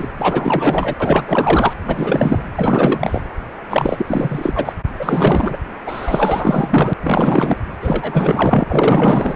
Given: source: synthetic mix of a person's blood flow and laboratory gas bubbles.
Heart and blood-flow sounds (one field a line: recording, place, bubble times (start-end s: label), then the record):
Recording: Doppler ultrasound of blood flow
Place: precordium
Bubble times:
0.00-0.07 s: bubbles
0.18-0.95 s: bubbles
1.00-1.73 s: bubbles
1.85-2.45 s: bubbles
2.54-3.21 s: bubbles
3.70-4.72 s: bubbles
4.99-5.57 s: bubbles
5.86-6.93 s: bubbles
7.03-7.56 s: bubbles
7.81-8.64 s: bubbles
8.67-9.36 s: bubbles
From the record:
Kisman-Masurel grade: 444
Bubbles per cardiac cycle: continuous sound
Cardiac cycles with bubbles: 100%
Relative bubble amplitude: maximal (0.775 to 0.999)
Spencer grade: 4 (maximum detectable bubble signal sounding continuously throughout systole and diastole of every cardiac period, and overriding the amplitude of the normal cardiac signals)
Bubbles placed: anywhere in the cardiac cycle